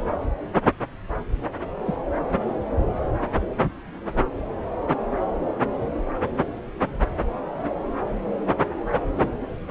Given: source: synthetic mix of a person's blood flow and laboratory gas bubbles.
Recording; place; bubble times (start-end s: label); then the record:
Doppler ultrasound of blood flow; subclavian vein
1.84-2.01 s: bubbles
9.16-9.31 s: bubbles
From the record:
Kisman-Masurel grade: 122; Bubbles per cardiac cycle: 1 to 2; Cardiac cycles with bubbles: 10 to 50%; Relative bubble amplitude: moderate (0.250 to 0.450); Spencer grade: 2 (many but less than half of the cardiac periods contain bubble signals, singularly or in groups); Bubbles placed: anywhere in the cardiac cycle